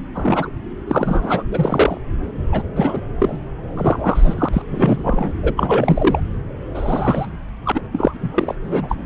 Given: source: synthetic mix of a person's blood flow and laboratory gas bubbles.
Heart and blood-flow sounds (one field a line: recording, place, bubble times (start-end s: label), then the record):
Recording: Doppler ultrasound of blood flow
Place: subclavian vein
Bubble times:
0.15-0.49 s: bubbles
0.89-1.44 s: bubbles
1.52-1.98 s: bubbles
2.47-2.62 s: bubbles
2.76-3.01 s: bubbles
3.19-3.40 s: bubbles
3.76-4.49 s: bubbles
4.53-4.62 s: bubbles
4.70-5.33 s: bubbles
5.42-6.21 s: bubbles
6.75-7.27 s: bubbles
7.66-7.81 s: bubbles
7.92-8.55 s: bubbles
8.64-9.05 s: bubbles
From the record:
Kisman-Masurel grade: 242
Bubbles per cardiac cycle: several, 3 to 8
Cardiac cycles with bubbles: 100%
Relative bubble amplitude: moderate (0.250 to 0.450)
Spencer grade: 3 (all of the cardiac periods contain showers or single bubble signals, but not dominating or overriding the cardiac motion signals)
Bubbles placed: anywhere in the cardiac cycle